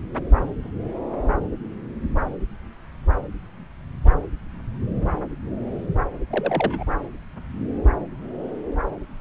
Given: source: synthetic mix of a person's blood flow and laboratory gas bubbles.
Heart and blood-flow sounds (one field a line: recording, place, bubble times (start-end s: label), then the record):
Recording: Doppler ultrasound of blood flow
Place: subclavian vein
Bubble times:
6.30-6.84 s: bubbles
From the record:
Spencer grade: 1 (occasional bubble signal discernible with the cardiac motion signal, with majority of cardiac periods free of bubbles)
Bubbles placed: anywhere in the cardiac cycle